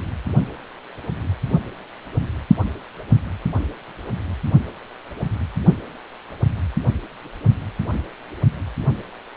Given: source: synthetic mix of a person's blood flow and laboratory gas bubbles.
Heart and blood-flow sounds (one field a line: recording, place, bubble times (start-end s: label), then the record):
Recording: Doppler ultrasound of blood flow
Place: precordium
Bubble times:
no bubbles
From the record:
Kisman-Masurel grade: 000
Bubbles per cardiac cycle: 0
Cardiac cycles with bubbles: 0%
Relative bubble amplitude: no bubbles discernible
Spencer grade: 0 (complete lack of bubble signals)